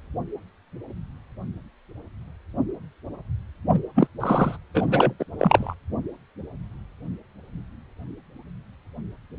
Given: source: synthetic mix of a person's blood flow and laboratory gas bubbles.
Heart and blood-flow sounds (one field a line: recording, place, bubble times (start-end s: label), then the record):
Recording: Doppler ultrasound of blood flow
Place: precordium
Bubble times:
3.72-3.80 s: bubbles
3.95-4.08 s: bubbles
4.20-4.57 s: bubbles
4.74-5.13 s: bubbles
5.19-5.25 s: bubbles
5.39-5.75 s: bubbles
From the record:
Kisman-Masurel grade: 223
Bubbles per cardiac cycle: several, 3 to 8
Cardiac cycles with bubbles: 10 to 50%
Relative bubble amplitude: loud (0.450 to 0.775)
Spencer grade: 2 (many but less than half of the cardiac periods contain bubble signals, singularly or in groups)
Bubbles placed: anywhere in the cardiac cycle